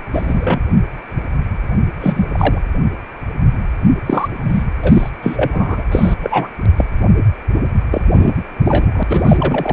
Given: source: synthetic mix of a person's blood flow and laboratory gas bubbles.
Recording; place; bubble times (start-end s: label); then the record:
Doppler ultrasound of blood flow; precordium
0.13-0.59 s: bubbles
2.00-2.62 s: bubbles
4.06-4.29 s: bubbles
4.48-4.63 s: bubbles
4.83-5.09 s: bubbles
5.21-5.84 s: bubbles
5.91-6.14 s: bubbles
6.22-6.48 s: bubbles
6.76-6.85 s: bubbles
7.91-8.02 s: bubbles
8.13-8.35 s: bubbles
8.65-9.03 s: bubbles
9.09-9.73 s: bubbles
From the record:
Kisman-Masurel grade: 233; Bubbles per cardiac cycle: several, 3 to 8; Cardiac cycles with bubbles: 50 to 99%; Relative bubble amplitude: loud (0.450 to 0.775); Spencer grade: 3 (all of the cardiac periods contain showers or single bubble signals, but not dominating or overriding the cardiac motion signals); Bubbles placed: anywhere in the cardiac cycle